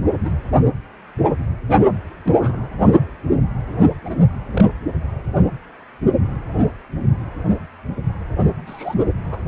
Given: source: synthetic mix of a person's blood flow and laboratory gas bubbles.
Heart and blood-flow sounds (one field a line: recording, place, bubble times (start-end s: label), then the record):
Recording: Doppler ultrasound of blood flow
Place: precordium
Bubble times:
0.23-0.31 s: bubbles
2.23-2.69 s: bubbles
4.04-4.16 s: bubbles
4.52-4.64 s: bubbles
8.66-8.95 s: bubbles
9.18-9.41 s: bubbles
From the record:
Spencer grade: 2 (many but less than half of the cardiac periods contain bubble signals, singularly or in groups)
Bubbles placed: only in the low amplitude regions of the cardiac cycle